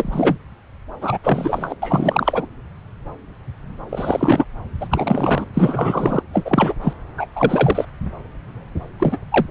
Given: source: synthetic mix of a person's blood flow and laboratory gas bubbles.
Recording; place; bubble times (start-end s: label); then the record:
Doppler ultrasound of blood flow; subclavian vein
0.00-0.36 s: bubbles
1.01-1.18 s: bubbles
1.23-1.75 s: bubbles
1.82-2.46 s: bubbles
3.89-4.45 s: bubbles
4.81-4.88 s: bubbles
4.91-5.45 s: bubbles
5.54-6.22 s: bubbles
6.33-6.74 s: bubbles
6.81-6.93 s: bubbles
7.18-7.28 s: bubbles
7.36-7.85 s: bubbles
8.99-9.17 s: bubbles
9.31-9.46 s: bubbles
From the record:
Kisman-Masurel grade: 332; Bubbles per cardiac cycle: rolling drumbeat, 9 or more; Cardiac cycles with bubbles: 50 to 99%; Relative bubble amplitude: moderate (0.250 to 0.450); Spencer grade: 3 (all of the cardiac periods contain showers or single bubble signals, but not dominating or overriding the cardiac motion signals); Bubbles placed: anywhere in the cardiac cycle